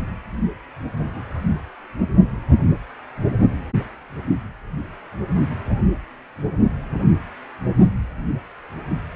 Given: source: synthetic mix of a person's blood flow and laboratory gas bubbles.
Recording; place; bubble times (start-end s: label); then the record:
Doppler ultrasound of blood flow; precordium
1.00-1.24 s: bubbles
From the record:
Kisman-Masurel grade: 121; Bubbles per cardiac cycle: 1 to 2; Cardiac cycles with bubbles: 10 to 50%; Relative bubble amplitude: barely perceptible (0.100 to 0.250); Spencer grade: 2 (many but less than half of the cardiac periods contain bubble signals, singularly or in groups); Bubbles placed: only in the low amplitude regions of the cardiac cycle